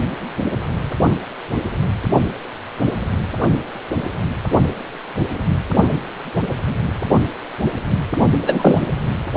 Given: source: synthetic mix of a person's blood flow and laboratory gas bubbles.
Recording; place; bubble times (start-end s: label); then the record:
Doppler ultrasound of blood flow; precordium
8.46-8.82 s: bubbles
From the record:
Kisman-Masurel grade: 213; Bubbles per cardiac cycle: several, 3 to 8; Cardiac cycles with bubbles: 1 to 10%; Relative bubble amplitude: loud (0.450 to 0.775); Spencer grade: 1 (occasional bubble signal discernible with the cardiac motion signal, with majority of cardiac periods free of bubbles); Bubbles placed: only in the low amplitude regions of the cardiac cycle